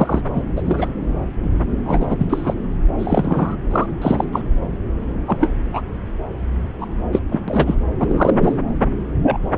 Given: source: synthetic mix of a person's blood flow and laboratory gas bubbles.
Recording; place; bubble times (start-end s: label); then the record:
Doppler ultrasound of blood flow; subclavian vein
0.00-0.22 s: bubbles
0.35-0.42 s: bubbles
0.56-0.62 s: bubbles
0.65-0.89 s: bubbles
1.85-2.16 s: bubbles
2.18-2.54 s: bubbles
2.98-3.56 s: bubbles
3.71-3.86 s: bubbles
4.01-4.24 s: bubbles
4.32-4.42 s: bubbles
5.27-5.38 s: bubbles
5.40-5.51 s: bubbles
5.73-5.82 s: bubbles
6.80-6.86 s: bubbles
7.12-7.19 s: bubbles
7.31-7.40 s: bubbles
7.47-7.75 s: bubbles
7.99-8.58 s: bubbles
9.22-9.38 s: bubbles
From the record:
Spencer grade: 3 (all of the cardiac periods contain showers or single bubble signals, but not dominating or overriding the cardiac motion signals); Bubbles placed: anywhere in the cardiac cycle